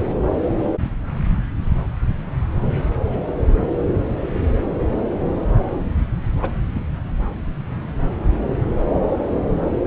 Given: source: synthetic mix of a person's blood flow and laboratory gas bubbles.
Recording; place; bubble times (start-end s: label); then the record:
Doppler ultrasound of blood flow; subclavian vein
6.42-6.50 s: bubbles
6.75-6.81 s: bubbles
From the record:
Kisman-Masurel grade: 112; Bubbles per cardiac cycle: 1 to 2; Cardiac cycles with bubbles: 1 to 10%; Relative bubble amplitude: moderate (0.250 to 0.450); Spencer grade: 1 (occasional bubble signal discernible with the cardiac motion signal, with majority of cardiac periods free of bubbles); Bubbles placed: anywhere in the cardiac cycle